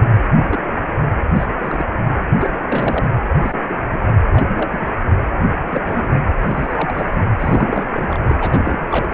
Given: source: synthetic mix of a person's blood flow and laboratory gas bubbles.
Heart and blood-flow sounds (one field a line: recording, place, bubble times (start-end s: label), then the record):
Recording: Doppler ultrasound of blood flow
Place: precordium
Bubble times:
0.00-0.02 s: bubbles
0.42-0.59 s: bubbles
1.34-1.47 s: bubbles
1.58-1.85 s: bubbles
2.06-2.14 s: bubbles
2.39-2.63 s: bubbles
2.69-3.11 s: bubbles
3.40-3.85 s: bubbles
3.93-3.99 s: bubbles
4.32-4.45 s: bubbles
4.55-5.07 s: bubbles
5.68-5.82 s: bubbles
5.86-6.09 s: bubbles
6.12-6.21 s: bubbles
6.40-7.23 s: bubbles
7.39-8.18 s: bubbles
8.23-8.38 s: bubbles
8.41-9.09 s: bubbles
From the record:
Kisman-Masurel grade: 242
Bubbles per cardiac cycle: several, 3 to 8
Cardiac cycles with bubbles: 100%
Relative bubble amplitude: moderate (0.250 to 0.450)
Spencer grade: 3 (all of the cardiac periods contain showers or single bubble signals, but not dominating or overriding the cardiac motion signals)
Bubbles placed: anywhere in the cardiac cycle